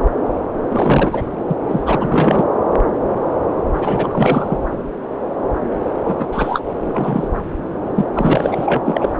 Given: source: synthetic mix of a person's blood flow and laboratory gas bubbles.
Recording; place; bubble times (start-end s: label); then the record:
Doppler ultrasound of blood flow; subclavian vein
0.68-1.26 s: bubbles
1.48-1.54 s: bubbles
1.68-2.45 s: bubbles
3.73-4.58 s: bubbles
6.04-6.28 s: bubbles
6.32-6.61 s: bubbles
6.80-7.28 s: bubbles
7.96-8.06 s: bubbles
8.15-8.80 s: bubbles
8.85-9.13 s: bubbles
From the record:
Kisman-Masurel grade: 333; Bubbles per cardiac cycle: rolling drumbeat, 9 or more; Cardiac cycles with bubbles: 50 to 99%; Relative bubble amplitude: loud (0.450 to 0.775); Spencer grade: 3 (all of the cardiac periods contain showers or single bubble signals, but not dominating or overriding the cardiac motion signals); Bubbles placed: anywhere in the cardiac cycle